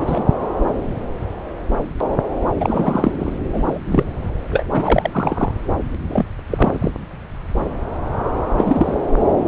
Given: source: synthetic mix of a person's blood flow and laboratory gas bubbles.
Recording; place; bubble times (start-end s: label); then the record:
Doppler ultrasound of blood flow; subclavian vein
0.01-0.24 s: bubbles
2.60-3.33 s: bubbles
3.53-3.79 s: bubbles
3.86-4.04 s: bubbles
4.51-4.66 s: bubbles
4.74-5.51 s: bubbles
6.08-6.25 s: bubbles
6.50-6.91 s: bubbles
8.57-9.01 s: bubbles
From the record:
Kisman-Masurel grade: 223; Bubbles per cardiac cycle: several, 3 to 8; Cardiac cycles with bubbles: 10 to 50%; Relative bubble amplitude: loud (0.450 to 0.775); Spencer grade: 2 (many but less than half of the cardiac periods contain bubble signals, singularly or in groups); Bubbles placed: anywhere in the cardiac cycle